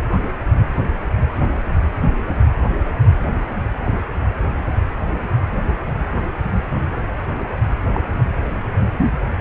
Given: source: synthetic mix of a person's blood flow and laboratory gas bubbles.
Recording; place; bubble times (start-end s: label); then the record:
Doppler ultrasound of blood flow; precordium
7.93-8.01 s: bubbles
8.19-8.23 s: bubbles
From the record:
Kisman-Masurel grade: 112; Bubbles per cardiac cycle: 1 to 2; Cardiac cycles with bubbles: 1 to 10%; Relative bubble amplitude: moderate (0.250 to 0.450); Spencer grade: 1 (occasional bubble signal discernible with the cardiac motion signal, with majority of cardiac periods free of bubbles); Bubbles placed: anywhere in the cardiac cycle